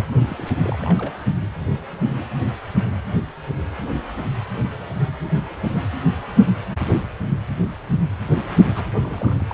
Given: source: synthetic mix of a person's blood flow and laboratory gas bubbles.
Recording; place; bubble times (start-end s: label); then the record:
Doppler ultrasound of blood flow; precordium
0.00-0.04 s: bubbles
0.27-0.53 s: bubbles
0.62-0.78 s: bubbles
0.81-1.18 s: bubbles
8.75-8.85 s: bubbles
8.95-9.01 s: bubbles
9.04-9.46 s: bubbles
9.50-9.54 s: bubbles
From the record:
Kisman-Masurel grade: 221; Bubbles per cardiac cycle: several, 3 to 8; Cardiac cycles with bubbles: 10 to 50%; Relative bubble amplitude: barely perceptible (0.100 to 0.250); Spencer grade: 2 (many but less than half of the cardiac periods contain bubble signals, singularly or in groups); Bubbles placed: only in the low amplitude regions of the cardiac cycle